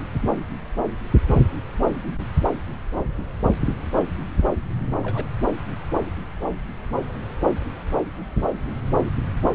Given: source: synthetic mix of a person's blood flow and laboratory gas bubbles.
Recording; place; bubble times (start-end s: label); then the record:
Doppler ultrasound of blood flow; subclavian vein
5.03-5.28 s: bubbles
From the record:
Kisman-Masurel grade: 111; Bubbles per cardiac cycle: 1 to 2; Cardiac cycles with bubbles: 1 to 10%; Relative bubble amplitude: barely perceptible (0.100 to 0.250); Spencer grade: 1 (occasional bubble signal discernible with the cardiac motion signal, with majority of cardiac periods free of bubbles); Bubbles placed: anywhere in the cardiac cycle